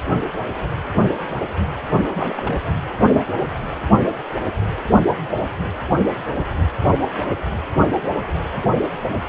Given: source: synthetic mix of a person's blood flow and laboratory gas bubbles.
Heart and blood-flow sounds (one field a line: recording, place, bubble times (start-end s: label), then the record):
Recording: Doppler ultrasound of blood flow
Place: precordium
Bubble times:
2.08-2.58 s: bubbles
From the record:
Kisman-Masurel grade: 221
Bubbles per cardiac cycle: several, 3 to 8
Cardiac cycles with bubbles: 10 to 50%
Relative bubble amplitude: barely perceptible (0.100 to 0.250)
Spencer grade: 2 (many but less than half of the cardiac periods contain bubble signals, singularly or in groups)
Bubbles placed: anywhere in the cardiac cycle